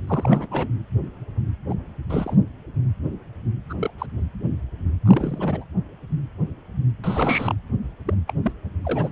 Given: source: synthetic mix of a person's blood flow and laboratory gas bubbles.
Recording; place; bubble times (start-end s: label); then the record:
Doppler ultrasound of blood flow; precordium
0.07-0.47 s: bubbles
0.51-0.68 s: bubbles
1.69-1.75 s: bubbles
2.09-2.37 s: bubbles
3.69-3.74 s: bubbles
3.78-3.91 s: bubbles
3.98-4.06 s: bubbles
5.05-5.65 s: bubbles
7.04-7.55 s: bubbles
8.06-8.14 s: bubbles
8.27-8.34 s: bubbles
8.43-8.52 s: bubbles
8.84-9.12 s: bubbles
From the record:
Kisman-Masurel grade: 222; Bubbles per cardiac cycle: several, 3 to 8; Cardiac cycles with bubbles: 10 to 50%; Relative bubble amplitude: moderate (0.250 to 0.450); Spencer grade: 2 (many but less than half of the cardiac periods contain bubble signals, singularly or in groups); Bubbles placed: anywhere in the cardiac cycle